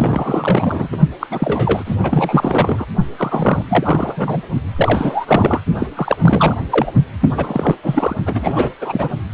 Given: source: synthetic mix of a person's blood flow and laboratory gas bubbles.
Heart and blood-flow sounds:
Doppler ultrasound of blood flow; precordium
0.00-0.88 s: bubbles
0.92-1.00 s: bubbles
1.19-1.27 s: bubbles
1.30-1.96 s: bubbles
2.03-2.86 s: bubbles
3.17-3.66 s: bubbles
3.69-4.42 s: bubbles
4.76-5.62 s: bubbles
5.79-5.88 s: bubbles
5.96-6.17 s: bubbles
6.21-6.64 s: bubbles
6.70-6.92 s: bubbles
7.21-7.76 s: bubbles
7.82-8.16 s: bubbles
8.26-8.70 s: bubbles
8.81-9.09 s: bubbles
From the record:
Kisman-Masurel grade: 343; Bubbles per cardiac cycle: rolling drumbeat, 9 or more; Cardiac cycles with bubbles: 100%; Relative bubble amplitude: loud (0.450 to 0.775); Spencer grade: 3 (all of the cardiac periods contain showers or single bubble signals, but not dominating or overriding the cardiac motion signals); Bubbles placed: only in the low amplitude regions of the cardiac cycle

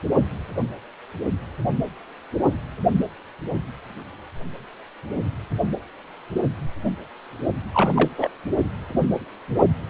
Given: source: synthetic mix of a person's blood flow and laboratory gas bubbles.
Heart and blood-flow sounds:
Doppler ultrasound of blood flow; precordium
7.74-8.10 s: bubbles
8.18-8.29 s: bubbles
From the record:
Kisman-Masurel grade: 212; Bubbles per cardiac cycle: several, 3 to 8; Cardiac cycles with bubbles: 1 to 10%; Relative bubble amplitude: moderate (0.250 to 0.450); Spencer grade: 1 (occasional bubble signal discernible with the cardiac motion signal, with majority of cardiac periods free of bubbles); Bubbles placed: only in the low amplitude regions of the cardiac cycle

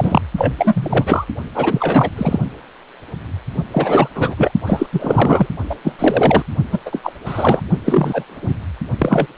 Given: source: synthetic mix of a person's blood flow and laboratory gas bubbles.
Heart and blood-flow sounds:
Doppler ultrasound of blood flow; precordium
0.00-0.21 s: bubbles
0.37-0.53 s: bubbles
0.58-1.25 s: bubbles
1.54-2.10 s: bubbles
2.16-2.39 s: bubbles
3.72-4.08 s: bubbles
4.15-4.52 s: bubbles
4.66-4.87 s: bubbles
4.92-5.47 s: bubbles
5.70-5.75 s: bubbles
5.83-5.93 s: bubbles
5.99-6.44 s: bubbles
6.72-6.80 s: bubbles
6.86-7.12 s: bubbles
7.25-7.61 s: bubbles
7.85-8.24 s: bubbles
8.27-8.62 s: bubbles
8.98-9.27 s: bubbles
From the record:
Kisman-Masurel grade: 333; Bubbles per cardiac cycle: rolling drumbeat, 9 or more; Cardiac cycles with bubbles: 50 to 99%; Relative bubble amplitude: loud (0.450 to 0.775); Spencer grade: 3 (all of the cardiac periods contain showers or single bubble signals, but not dominating or overriding the cardiac motion signals); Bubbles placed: only in the low amplitude regions of the cardiac cycle

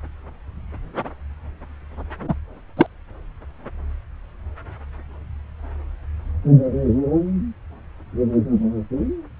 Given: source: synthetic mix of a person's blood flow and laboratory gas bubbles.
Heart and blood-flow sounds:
Doppler ultrasound of blood flow; subclavian vein
2.28-2.35 s: bubbles
2.77-2.87 s: bubbles
From the record:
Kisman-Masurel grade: 213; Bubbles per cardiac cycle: several, 3 to 8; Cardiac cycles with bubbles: 1 to 10%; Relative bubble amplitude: loud (0.450 to 0.775); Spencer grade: 1 (occasional bubble signal discernible with the cardiac motion signal, with majority of cardiac periods free of bubbles); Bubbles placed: anywhere in the cardiac cycle

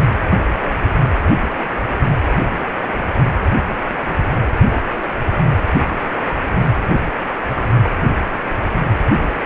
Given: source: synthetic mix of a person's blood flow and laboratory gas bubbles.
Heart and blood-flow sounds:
Doppler ultrasound of blood flow; precordium
no bubbles
From the record:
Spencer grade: 0 (complete lack of bubble signals)

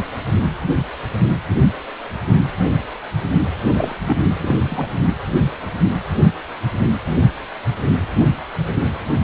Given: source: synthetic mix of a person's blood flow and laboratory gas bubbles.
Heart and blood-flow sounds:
Doppler ultrasound of blood flow; precordium
3.73-3.95 s: bubbles
4.05-4.23 s: bubbles
4.38-4.55 s: bubbles
4.68-4.98 s: bubbles
From the record:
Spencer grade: 2 (many but less than half of the cardiac periods contain bubble signals, singularly or in groups); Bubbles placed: anywhere in the cardiac cycle

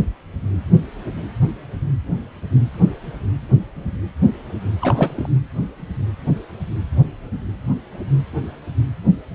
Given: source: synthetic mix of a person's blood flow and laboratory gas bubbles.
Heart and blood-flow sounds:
Doppler ultrasound of blood flow; precordium
4.82-5.28 s: bubbles
From the record:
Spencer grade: 1 (occasional bubble signal discernible with the cardiac motion signal, with majority of cardiac periods free of bubbles); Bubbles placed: anywhere in the cardiac cycle

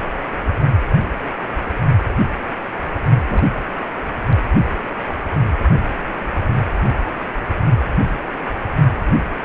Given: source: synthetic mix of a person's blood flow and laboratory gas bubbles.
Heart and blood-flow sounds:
Doppler ultrasound of blood flow; precordium
3.24-3.53 s: bubbles
From the record:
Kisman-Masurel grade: 111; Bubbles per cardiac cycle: 1 to 2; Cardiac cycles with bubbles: 1 to 10%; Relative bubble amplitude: barely perceptible (0.100 to 0.250); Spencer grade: 1 (occasional bubble signal discernible with the cardiac motion signal, with majority of cardiac periods free of bubbles); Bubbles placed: only in the low amplitude regions of the cardiac cycle

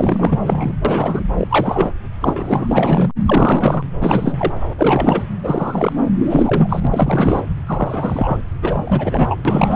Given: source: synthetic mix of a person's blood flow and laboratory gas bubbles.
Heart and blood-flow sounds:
Doppler ultrasound of blood flow; subclavian vein
0.00-0.72 s: bubbles
0.84-1.23 s: bubbles
1.38-1.92 s: bubbles
2.21-3.11 s: bubbles
3.26-3.82 s: bubbles
4.01-4.53 s: bubbles
4.78-5.23 s: bubbles
5.43-5.93 s: bubbles
6.18-6.87 s: bubbles
6.91-7.43 s: bubbles
7.67-8.39 s: bubbles
8.62-9.35 s: bubbles
9.45-9.76 s: bubbles
From the record:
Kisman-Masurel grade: 343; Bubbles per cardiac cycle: rolling drumbeat, 9 or more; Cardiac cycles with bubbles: 100%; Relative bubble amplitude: loud (0.450 to 0.775); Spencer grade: 3 (all of the cardiac periods contain showers or single bubble signals, but not dominating or overriding the cardiac motion signals); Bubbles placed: anywhere in the cardiac cycle

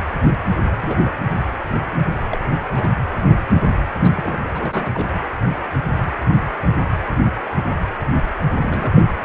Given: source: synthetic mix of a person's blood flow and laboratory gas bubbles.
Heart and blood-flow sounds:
Doppler ultrasound of blood flow; precordium
0.80-1.21 s: bubbles
1.35-1.44 s: bubbles
2.29-2.38 s: bubbles
2.44-2.50 s: bubbles
2.75-2.88 s: bubbles
4.03-4.11 s: bubbles
4.15-4.45 s: bubbles
4.55-4.91 s: bubbles
4.94-5.06 s: bubbles
8.48-9.03 s: bubbles
From the record:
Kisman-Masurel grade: 221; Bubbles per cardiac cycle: several, 3 to 8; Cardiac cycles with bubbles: 10 to 50%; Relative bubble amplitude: barely perceptible (0.100 to 0.250); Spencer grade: 2 (many but less than half of the cardiac periods contain bubble signals, singularly or in groups); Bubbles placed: anywhere in the cardiac cycle

